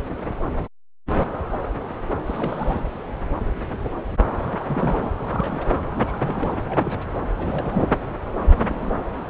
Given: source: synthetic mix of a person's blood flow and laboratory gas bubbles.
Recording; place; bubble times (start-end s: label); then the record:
Doppler ultrasound of blood flow; subclavian vein
2.26-2.80 s: bubbles
4.42-4.59 s: bubbles
4.66-5.10 s: bubbles
5.28-5.81 s: bubbles
5.95-6.16 s: bubbles
6.22-6.56 s: bubbles
6.62-7.00 s: bubbles
7.38-7.88 s: bubbles
8.49-8.99 s: bubbles
From the record:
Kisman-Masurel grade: 221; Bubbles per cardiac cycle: several, 3 to 8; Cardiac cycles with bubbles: 10 to 50%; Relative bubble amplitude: barely perceptible (0.100 to 0.250); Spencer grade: 2 (many but less than half of the cardiac periods contain bubble signals, singularly or in groups); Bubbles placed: anywhere in the cardiac cycle